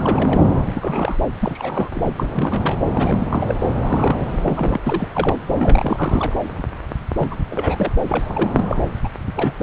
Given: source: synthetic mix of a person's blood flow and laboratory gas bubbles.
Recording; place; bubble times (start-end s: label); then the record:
Doppler ultrasound of blood flow; subclavian vein
0.00-0.41 s: bubbles
0.51-1.17 s: bubbles
1.41-1.90 s: bubbles
1.94-2.13 s: bubbles
2.17-2.78 s: bubbles
2.90-3.55 s: bubbles
3.79-4.80 s: bubbles
4.86-5.08 s: bubbles
5.14-5.39 s: bubbles
5.58-6.33 s: bubbles
7.16-7.28 s: bubbles
7.30-7.36 s: bubbles
7.50-7.92 s: bubbles
8.07-8.64 s: bubbles
8.69-8.77 s: bubbles
9.04-9.09 s: bubbles
9.27-9.32 s: bubbles
9.36-9.55 s: bubbles
From the record:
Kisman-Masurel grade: 332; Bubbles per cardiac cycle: rolling drumbeat, 9 or more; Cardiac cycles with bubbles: 50 to 99%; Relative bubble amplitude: moderate (0.250 to 0.450); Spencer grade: 3 (all of the cardiac periods contain showers or single bubble signals, but not dominating or overriding the cardiac motion signals); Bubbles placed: anywhere in the cardiac cycle